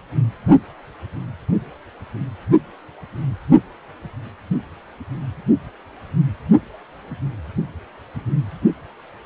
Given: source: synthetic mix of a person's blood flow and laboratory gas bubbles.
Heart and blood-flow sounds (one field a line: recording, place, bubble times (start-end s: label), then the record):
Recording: Doppler ultrasound of blood flow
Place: precordium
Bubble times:
no bubbles
From the record:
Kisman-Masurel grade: 000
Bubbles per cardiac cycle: 0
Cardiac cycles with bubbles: 0%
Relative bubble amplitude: no bubbles discernible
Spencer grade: 0 (complete lack of bubble signals)